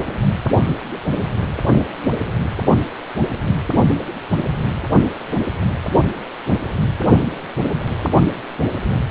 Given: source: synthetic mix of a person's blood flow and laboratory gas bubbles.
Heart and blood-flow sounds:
Doppler ultrasound of blood flow; precordium
no bubbles
From the record:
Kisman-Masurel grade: 000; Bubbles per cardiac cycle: 0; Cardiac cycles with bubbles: 0%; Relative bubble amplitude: no bubbles discernible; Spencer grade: 0 (complete lack of bubble signals)

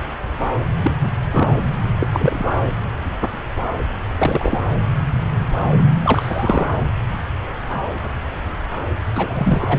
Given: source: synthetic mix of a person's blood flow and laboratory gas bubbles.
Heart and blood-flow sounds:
Doppler ultrasound of blood flow; subclavian vein
0.82-0.92 s: bubbles
1.02-1.08 s: bubbles
1.32-1.48 s: bubbles
1.99-2.10 s: bubbles
2.12-2.49 s: bubbles
4.18-4.60 s: bubbles
6.04-6.70 s: bubbles
9.15-9.79 s: bubbles
From the record:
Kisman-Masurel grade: 232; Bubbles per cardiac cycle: several, 3 to 8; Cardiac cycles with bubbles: 50 to 99%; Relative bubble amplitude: moderate (0.250 to 0.450); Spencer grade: 3 (all of the cardiac periods contain showers or single bubble signals, but not dominating or overriding the cardiac motion signals); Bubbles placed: anywhere in the cardiac cycle

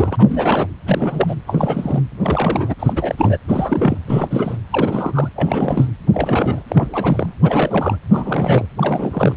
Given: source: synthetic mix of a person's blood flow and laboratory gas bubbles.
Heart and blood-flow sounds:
Doppler ultrasound of blood flow; precordium
0.00-0.67 s: bubbles
0.86-1.35 s: bubbles
1.47-2.01 s: bubbles
2.22-2.74 s: bubbles
2.79-3.38 s: bubbles
3.48-3.98 s: bubbles
4.07-4.56 s: bubbles
4.70-5.29 s: bubbles
5.35-5.88 s: bubbles
6.13-6.62 s: bubbles
6.68-7.33 s: bubbles
7.43-7.96 s: bubbles
8.11-8.66 s: bubbles
8.77-9.36 s: bubbles
From the record:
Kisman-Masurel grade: 342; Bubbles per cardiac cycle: rolling drumbeat, 9 or more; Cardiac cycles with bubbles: 100%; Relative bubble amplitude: moderate (0.250 to 0.450); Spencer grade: 3 (all of the cardiac periods contain showers or single bubble signals, but not dominating or overriding the cardiac motion signals); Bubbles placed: anywhere in the cardiac cycle

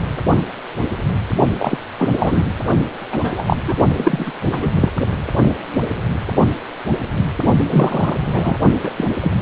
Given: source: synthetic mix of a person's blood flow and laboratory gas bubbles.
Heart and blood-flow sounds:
Doppler ultrasound of blood flow; precordium
1.59-1.78 s: bubbles
1.99-2.10 s: bubbles
2.19-2.50 s: bubbles
3.12-3.44 s: bubbles
3.47-3.58 s: bubbles
3.64-3.73 s: bubbles
3.95-4.33 s: bubbles
4.51-4.59 s: bubbles
4.62-4.92 s: bubbles
7.70-8.16 s: bubbles
8.21-8.58 s: bubbles
8.83-8.91 s: bubbles
8.96-9.04 s: bubbles
9.21-9.32 s: bubbles
From the record:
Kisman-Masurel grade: 233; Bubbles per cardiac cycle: several, 3 to 8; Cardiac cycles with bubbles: 50 to 99%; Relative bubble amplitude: loud (0.450 to 0.775); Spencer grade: 3 (all of the cardiac periods contain showers or single bubble signals, but not dominating or overriding the cardiac motion signals); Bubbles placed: only in the low amplitude regions of the cardiac cycle

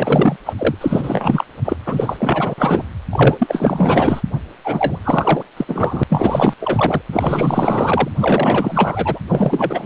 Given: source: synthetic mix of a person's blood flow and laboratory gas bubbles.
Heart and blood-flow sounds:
Doppler ultrasound of blood flow; precordium
0.00-0.36 s: bubbles
0.45-0.54 s: bubbles
0.58-0.75 s: bubbles
0.81-1.44 s: bubbles
1.64-1.76 s: bubbles
1.86-2.54 s: bubbles
2.58-2.85 s: bubbles
3.12-4.22 s: bubbles
4.64-5.00 s: bubbles
5.03-5.43 s: bubbles
5.56-5.65 s: bubbles
5.68-6.03 s: bubbles
6.09-6.53 s: bubbles
6.61-7.02 s: bubbles
7.12-8.09 s: bubbles
8.16-9.19 s: bubbles
9.27-9.86 s: bubbles
From the record:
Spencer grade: 4 (maximum detectable bubble signal sounding continuously throughout systole and diastole of every cardiac period, and overriding the amplitude of the normal cardiac signals); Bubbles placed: anywhere in the cardiac cycle

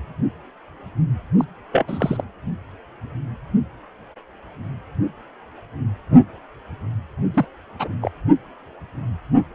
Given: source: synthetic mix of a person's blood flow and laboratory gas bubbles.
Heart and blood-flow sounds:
Doppler ultrasound of blood flow; precordium
1.38-1.44 s: bubbles
1.71-2.24 s: bubbles
7.33-7.46 s: bubbles
7.79-7.88 s: bubbles
8.02-8.11 s: bubbles
From the record:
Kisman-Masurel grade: 222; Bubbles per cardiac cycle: several, 3 to 8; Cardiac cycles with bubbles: 10 to 50%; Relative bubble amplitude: moderate (0.250 to 0.450); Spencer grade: 2 (many but less than half of the cardiac periods contain bubble signals, singularly or in groups); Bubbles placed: anywhere in the cardiac cycle

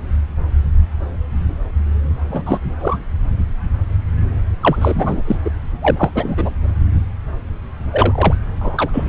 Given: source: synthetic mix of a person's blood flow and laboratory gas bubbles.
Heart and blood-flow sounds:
Doppler ultrasound of blood flow; subclavian vein
2.28-2.43 s: bubbles
2.45-2.60 s: bubbles
2.80-2.97 s: bubbles
4.61-5.22 s: bubbles
5.27-5.37 s: bubbles
5.45-5.50 s: bubbles
5.82-6.10 s: bubbles
6.15-6.54 s: bubbles
7.91-8.34 s: bubbles
8.61-8.89 s: bubbles
8.93-9.09 s: bubbles
From the record:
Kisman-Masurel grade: 233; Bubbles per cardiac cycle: several, 3 to 8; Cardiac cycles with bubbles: 50 to 99%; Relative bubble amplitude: loud (0.450 to 0.775); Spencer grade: 3 (all of the cardiac periods contain showers or single bubble signals, but not dominating or overriding the cardiac motion signals); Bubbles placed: anywhere in the cardiac cycle

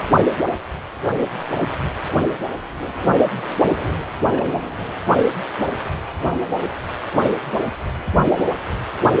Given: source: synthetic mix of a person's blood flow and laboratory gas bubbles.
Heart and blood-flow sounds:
Doppler ultrasound of blood flow; precordium
4.31-4.59 s: bubbles
4.79-4.92 s: bubbles
From the record:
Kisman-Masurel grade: 111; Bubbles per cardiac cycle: 1 to 2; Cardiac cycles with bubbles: 1 to 10%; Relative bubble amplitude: barely perceptible (0.100 to 0.250); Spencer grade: 1 (occasional bubble signal discernible with the cardiac motion signal, with majority of cardiac periods free of bubbles); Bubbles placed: anywhere in the cardiac cycle

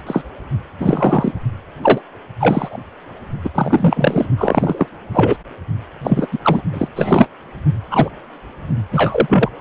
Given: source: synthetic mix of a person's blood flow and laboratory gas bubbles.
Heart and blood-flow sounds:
Doppler ultrasound of blood flow; precordium
0.07-0.21 s: bubbles
0.80-1.32 s: bubbles
1.82-2.01 s: bubbles
2.40-2.77 s: bubbles
3.44-3.50 s: bubbles
3.54-4.26 s: bubbles
4.38-4.87 s: bubbles
5.12-5.37 s: bubbles
6.04-6.28 s: bubbles
6.32-6.38 s: bubbles
6.43-6.62 s: bubbles
6.73-6.89 s: bubbles
6.96-7.28 s: bubbles
7.91-8.10 s: bubbles
8.92-9.49 s: bubbles
From the record:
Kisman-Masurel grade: 243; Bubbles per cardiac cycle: several, 3 to 8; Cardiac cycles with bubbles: 100%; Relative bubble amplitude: loud (0.450 to 0.775); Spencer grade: 3 (all of the cardiac periods contain showers or single bubble signals, but not dominating or overriding the cardiac motion signals); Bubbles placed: only in the low amplitude regions of the cardiac cycle

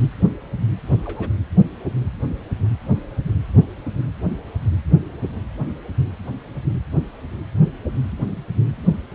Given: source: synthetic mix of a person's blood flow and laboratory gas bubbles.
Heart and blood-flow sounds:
Doppler ultrasound of blood flow; precordium
1.05-1.30 s: bubbles
From the record:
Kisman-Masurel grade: 111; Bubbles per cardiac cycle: 1 to 2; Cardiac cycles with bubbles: 1 to 10%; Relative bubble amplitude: barely perceptible (0.100 to 0.250); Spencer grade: 1 (occasional bubble signal discernible with the cardiac motion signal, with majority of cardiac periods free of bubbles); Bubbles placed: anywhere in the cardiac cycle

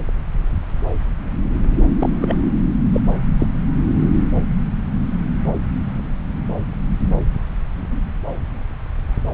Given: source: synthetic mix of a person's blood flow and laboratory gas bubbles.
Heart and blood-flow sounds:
Doppler ultrasound of blood flow; subclavian vein
1.99-2.10 s: bubbles
2.21-2.36 s: bubbles
2.94-3.00 s: bubbles
3.40-3.47 s: bubbles
From the record:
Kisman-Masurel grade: 122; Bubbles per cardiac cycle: 1 to 2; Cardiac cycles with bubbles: 10 to 50%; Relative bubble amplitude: moderate (0.250 to 0.450); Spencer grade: 2 (many but less than half of the cardiac periods contain bubble signals, singularly or in groups); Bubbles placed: anywhere in the cardiac cycle

